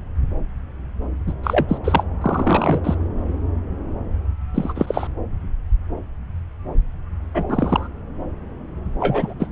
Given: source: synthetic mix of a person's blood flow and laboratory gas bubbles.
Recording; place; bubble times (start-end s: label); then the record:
Doppler ultrasound of blood flow; subclavian vein
1.26-1.33 s: bubbles
1.43-1.78 s: bubbles
1.84-2.04 s: bubbles
2.21-2.96 s: bubbles
4.54-5.07 s: bubbles
7.34-7.45 s: bubbles
7.49-7.88 s: bubbles
9.00-9.34 s: bubbles
9.39-9.47 s: bubbles
From the record:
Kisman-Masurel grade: 222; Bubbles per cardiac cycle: several, 3 to 8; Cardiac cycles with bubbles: 10 to 50%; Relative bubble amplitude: moderate (0.250 to 0.450); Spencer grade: 2 (many but less than half of the cardiac periods contain bubble signals, singularly or in groups); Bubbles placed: anywhere in the cardiac cycle